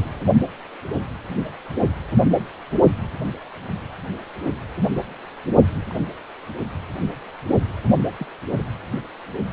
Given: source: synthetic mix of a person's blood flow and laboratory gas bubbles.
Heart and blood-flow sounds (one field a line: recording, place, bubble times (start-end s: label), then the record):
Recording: Doppler ultrasound of blood flow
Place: precordium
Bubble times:
5.90-5.93 s: bubbles
8.19-8.26 s: bubbles
8.57-8.65 s: bubbles
From the record:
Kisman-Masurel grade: 121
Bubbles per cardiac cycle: 1 to 2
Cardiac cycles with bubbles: 10 to 50%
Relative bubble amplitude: barely perceptible (0.100 to 0.250)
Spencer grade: 2 (many but less than half of the cardiac periods contain bubble signals, singularly or in groups)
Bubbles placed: only in the low amplitude regions of the cardiac cycle